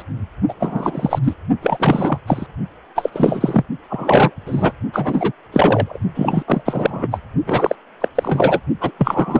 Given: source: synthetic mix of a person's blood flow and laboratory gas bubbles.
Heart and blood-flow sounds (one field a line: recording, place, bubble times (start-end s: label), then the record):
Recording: Doppler ultrasound of blood flow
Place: precordium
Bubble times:
0.00-0.03 s: bubbles
0.48-0.54 s: bubbles
0.59-1.19 s: bubbles
1.23-1.33 s: bubbles
1.62-2.20 s: bubbles
2.27-2.46 s: bubbles
2.96-3.09 s: bubbles
3.12-3.63 s: bubbles
3.90-4.31 s: bubbles
4.46-4.73 s: bubbles
4.93-5.32 s: bubbles
5.52-5.99 s: bubbles
6.15-6.44 s: bubbles
6.47-6.62 s: bubbles
6.65-7.08 s: bubbles
7.11-7.20 s: bubbles
7.46-7.76 s: bubbles
8.00-8.09 s: bubbles
8.15-8.60 s: bubbles
8.80-8.92 s: bubbles
8.99-9.40 s: bubbles
From the record:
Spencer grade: 3 (all of the cardiac periods contain showers or single bubble signals, but not dominating or overriding the cardiac motion signals)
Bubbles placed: only in the low amplitude regions of the cardiac cycle